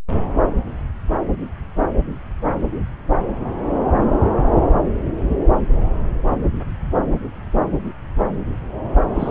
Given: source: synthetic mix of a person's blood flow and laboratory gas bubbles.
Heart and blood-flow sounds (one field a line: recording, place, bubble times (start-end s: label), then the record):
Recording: Doppler ultrasound of blood flow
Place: subclavian vein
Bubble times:
9.14-9.31 s: bubbles
From the record:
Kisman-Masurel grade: 221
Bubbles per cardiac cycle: several, 3 to 8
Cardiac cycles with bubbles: 10 to 50%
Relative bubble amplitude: barely perceptible (0.100 to 0.250)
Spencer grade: 2 (many but less than half of the cardiac periods contain bubble signals, singularly or in groups)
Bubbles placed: anywhere in the cardiac cycle